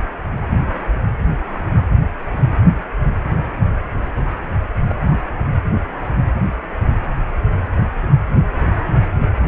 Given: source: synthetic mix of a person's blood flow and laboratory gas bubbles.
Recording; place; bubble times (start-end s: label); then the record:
Doppler ultrasound of blood flow; precordium
4.88-4.96 s: bubbles
From the record:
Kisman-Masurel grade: 112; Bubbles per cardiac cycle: 1 to 2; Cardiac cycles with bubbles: 1 to 10%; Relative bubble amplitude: moderate (0.250 to 0.450); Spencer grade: 1 (occasional bubble signal discernible with the cardiac motion signal, with majority of cardiac periods free of bubbles); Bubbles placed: anywhere in the cardiac cycle